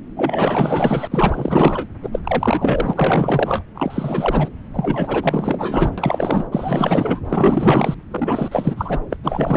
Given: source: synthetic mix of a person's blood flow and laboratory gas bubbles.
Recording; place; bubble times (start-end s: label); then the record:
Doppler ultrasound of blood flow; subclavian vein
0.16-1.07 s: bubbles
1.11-1.87 s: bubbles
2.02-2.10 s: bubbles
2.12-2.19 s: bubbles
2.23-3.63 s: bubbles
3.74-4.49 s: bubbles
4.72-5.92 s: bubbles
5.97-6.48 s: bubbles
6.51-7.19 s: bubbles
7.29-7.94 s: bubbles
8.11-9.00 s: bubbles
9.10-9.17 s: bubbles
9.24-9.57 s: bubbles
From the record:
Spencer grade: 4 (maximum detectable bubble signal sounding continuously throughout systole and diastole of every cardiac period, and overriding the amplitude of the normal cardiac signals); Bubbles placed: anywhere in the cardiac cycle